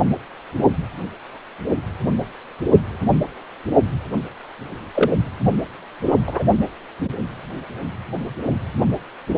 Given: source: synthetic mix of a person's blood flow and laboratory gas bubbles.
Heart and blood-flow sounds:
Doppler ultrasound of blood flow; precordium
4.94-5.11 s: bubbles
6.05-6.13 s: bubbles
6.26-6.43 s: bubbles
From the record:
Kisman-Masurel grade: 123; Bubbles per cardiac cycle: 1 to 2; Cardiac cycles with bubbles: 10 to 50%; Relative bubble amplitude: loud (0.450 to 0.775); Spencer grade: 2 (many but less than half of the cardiac periods contain bubble signals, singularly or in groups); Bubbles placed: only in the low amplitude regions of the cardiac cycle

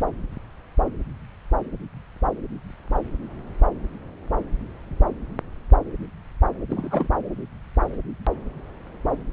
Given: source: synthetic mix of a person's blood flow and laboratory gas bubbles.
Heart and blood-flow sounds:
Doppler ultrasound of blood flow; subclavian vein
6.69-7.08 s: bubbles
From the record:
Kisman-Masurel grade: 112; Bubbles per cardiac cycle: 1 to 2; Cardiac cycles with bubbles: 1 to 10%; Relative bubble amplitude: moderate (0.250 to 0.450); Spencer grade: 1 (occasional bubble signal discernible with the cardiac motion signal, with majority of cardiac periods free of bubbles); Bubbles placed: anywhere in the cardiac cycle

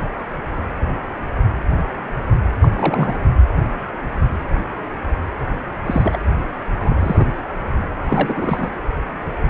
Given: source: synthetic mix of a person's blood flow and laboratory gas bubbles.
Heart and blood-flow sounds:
Doppler ultrasound of blood flow; precordium
2.60-2.69 s: bubbles
2.72-3.19 s: bubbles
5.85-6.18 s: bubbles
6.77-7.26 s: bubbles
8.04-8.69 s: bubbles
From the record:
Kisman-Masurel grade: 222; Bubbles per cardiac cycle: several, 3 to 8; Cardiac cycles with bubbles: 10 to 50%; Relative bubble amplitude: moderate (0.250 to 0.450); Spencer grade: 2 (many but less than half of the cardiac periods contain bubble signals, singularly or in groups); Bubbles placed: anywhere in the cardiac cycle

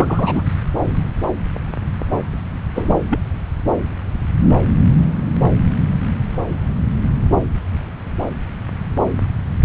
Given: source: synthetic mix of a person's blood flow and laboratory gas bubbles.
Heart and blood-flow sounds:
Doppler ultrasound of blood flow; subclavian vein
0.00-0.52 s: bubbles
2.75-2.95 s: bubbles
3.08-3.19 s: bubbles
9.62-9.65 s: bubbles
From the record:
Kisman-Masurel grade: 223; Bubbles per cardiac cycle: several, 3 to 8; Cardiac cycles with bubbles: 10 to 50%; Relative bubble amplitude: loud (0.450 to 0.775); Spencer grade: 2 (many but less than half of the cardiac periods contain bubble signals, singularly or in groups); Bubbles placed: anywhere in the cardiac cycle

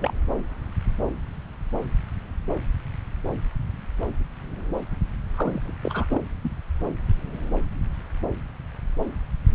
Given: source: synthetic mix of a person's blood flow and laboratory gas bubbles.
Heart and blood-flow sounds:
Doppler ultrasound of blood flow; subclavian vein
0.00-0.14 s: bubbles
5.33-5.72 s: bubbles
5.83-6.06 s: bubbles
6.09-6.21 s: bubbles
6.43-6.51 s: bubbles
From the record:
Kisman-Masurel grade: 221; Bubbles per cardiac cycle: several, 3 to 8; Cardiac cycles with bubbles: 10 to 50%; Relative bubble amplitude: barely perceptible (0.100 to 0.250); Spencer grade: 2 (many but less than half of the cardiac periods contain bubble signals, singularly or in groups); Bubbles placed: anywhere in the cardiac cycle

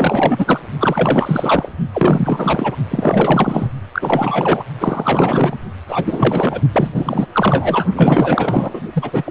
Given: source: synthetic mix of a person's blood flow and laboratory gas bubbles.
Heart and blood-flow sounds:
Doppler ultrasound of blood flow; precordium
0.00-0.60 s: bubbles
0.80-1.73 s: bubbles
1.93-2.75 s: bubbles
2.90-3.71 s: bubbles
3.93-4.64 s: bubbles
4.79-5.58 s: bubbles
5.88-6.60 s: bubbles
6.72-7.26 s: bubbles
7.32-7.84 s: bubbles
7.94-8.81 s: bubbles
8.93-9.31 s: bubbles
From the record:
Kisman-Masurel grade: 444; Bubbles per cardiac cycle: continuous sound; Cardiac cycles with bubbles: 100%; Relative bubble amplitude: maximal (0.775 to 0.999); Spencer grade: 4 (maximum detectable bubble signal sounding continuously throughout systole and diastole of every cardiac period, and overriding the amplitude of the normal cardiac signals); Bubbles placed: only in the low amplitude regions of the cardiac cycle

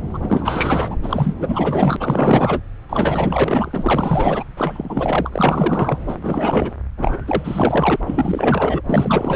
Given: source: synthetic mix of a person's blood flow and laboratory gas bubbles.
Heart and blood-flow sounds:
Doppler ultrasound of blood flow; subclavian vein
0.13-0.19 s: bubbles
0.22-0.96 s: bubbles
1.02-1.35 s: bubbles
1.40-1.96 s: bubbles
2.00-2.60 s: bubbles
2.89-4.45 s: bubbles
4.56-5.99 s: bubbles
6.07-6.16 s: bubbles
6.22-6.75 s: bubbles
6.97-7.17 s: bubbles
7.27-7.96 s: bubbles
8.06-8.81 s: bubbles
8.86-9.36 s: bubbles
From the record:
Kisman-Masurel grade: 444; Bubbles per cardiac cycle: continuous sound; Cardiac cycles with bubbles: 100%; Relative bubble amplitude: maximal (0.775 to 0.999); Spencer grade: 4 (maximum detectable bubble signal sounding continuously throughout systole and diastole of every cardiac period, and overriding the amplitude of the normal cardiac signals); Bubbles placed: anywhere in the cardiac cycle

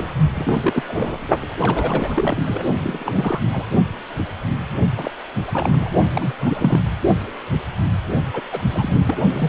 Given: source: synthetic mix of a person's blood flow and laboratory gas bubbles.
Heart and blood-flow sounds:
Doppler ultrasound of blood flow; precordium
0.00-0.07 s: bubbles
0.34-0.83 s: bubbles
0.88-1.26 s: bubbles
1.60-2.37 s: bubbles
2.44-2.62 s: bubbles
2.84-3.40 s: bubbles
3.51-3.66 s: bubbles
4.97-5.11 s: bubbles
5.47-5.89 s: bubbles
6.15-6.33 s: bubbles
6.39-6.79 s: bubbles
8.33-8.41 s: bubbles
8.51-9.02 s: bubbles
9.07-9.17 s: bubbles
9.34-9.48 s: bubbles
From the record:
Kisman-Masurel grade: 332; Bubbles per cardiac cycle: rolling drumbeat, 9 or more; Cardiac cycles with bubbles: 50 to 99%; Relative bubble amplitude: moderate (0.250 to 0.450); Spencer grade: 3 (all of the cardiac periods contain showers or single bubble signals, but not dominating or overriding the cardiac motion signals); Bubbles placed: only in the low amplitude regions of the cardiac cycle

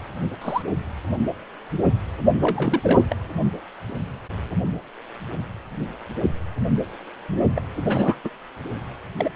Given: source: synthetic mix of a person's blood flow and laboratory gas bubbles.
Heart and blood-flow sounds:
Doppler ultrasound of blood flow; precordium
0.41-0.62 s: bubbles
2.42-3.06 s: bubbles
3.10-3.16 s: bubbles
7.55-7.61 s: bubbles
7.85-8.19 s: bubbles
8.24-8.29 s: bubbles
9.16-9.29 s: bubbles
From the record:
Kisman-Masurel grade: 222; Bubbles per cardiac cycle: several, 3 to 8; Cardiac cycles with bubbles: 10 to 50%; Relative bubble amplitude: moderate (0.250 to 0.450); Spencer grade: 2 (many but less than half of the cardiac periods contain bubble signals, singularly or in groups); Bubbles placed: only in the low amplitude regions of the cardiac cycle

